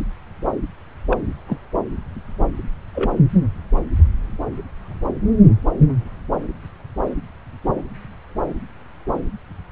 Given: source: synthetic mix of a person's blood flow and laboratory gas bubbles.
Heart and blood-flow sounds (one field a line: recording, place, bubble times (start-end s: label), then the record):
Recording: Doppler ultrasound of blood flow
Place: subclavian vein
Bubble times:
1.08-1.18 s: bubbles
1.47-1.57 s: bubbles
2.94-3.10 s: bubbles
From the record:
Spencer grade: 1 (occasional bubble signal discernible with the cardiac motion signal, with majority of cardiac periods free of bubbles)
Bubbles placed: anywhere in the cardiac cycle